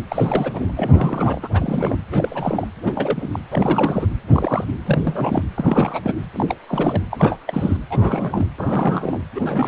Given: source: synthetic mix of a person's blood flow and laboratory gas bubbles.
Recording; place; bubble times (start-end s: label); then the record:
Doppler ultrasound of blood flow; precordium
0.09-0.73 s: bubbles
0.76-1.49 s: bubbles
1.53-1.96 s: bubbles
2.10-2.68 s: bubbles
2.83-3.40 s: bubbles
3.51-4.07 s: bubbles
4.27-4.64 s: bubbles
4.85-5.01 s: bubbles
5.04-5.43 s: bubbles
5.56-6.15 s: bubbles
6.33-6.46 s: bubbles
6.48-6.56 s: bubbles
6.68-7.01 s: bubbles
7.10-7.39 s: bubbles
7.46-7.76 s: bubbles
7.90-8.48 s: bubbles
8.56-9.20 s: bubbles
9.34-9.68 s: bubbles
From the record:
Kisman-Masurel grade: 332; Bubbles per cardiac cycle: rolling drumbeat, 9 or more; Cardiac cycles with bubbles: 50 to 99%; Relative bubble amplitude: moderate (0.250 to 0.450); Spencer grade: 3 (all of the cardiac periods contain showers or single bubble signals, but not dominating or overriding the cardiac motion signals); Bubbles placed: anywhere in the cardiac cycle